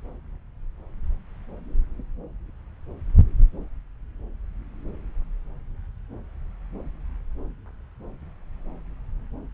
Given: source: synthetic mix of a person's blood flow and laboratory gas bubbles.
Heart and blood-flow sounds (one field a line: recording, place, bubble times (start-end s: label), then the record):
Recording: Doppler ultrasound of blood flow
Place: subclavian vein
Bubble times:
no bubbles
From the record:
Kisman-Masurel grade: 000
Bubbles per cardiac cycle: 0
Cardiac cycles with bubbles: 0%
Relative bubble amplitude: no bubbles discernible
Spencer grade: 0 (complete lack of bubble signals)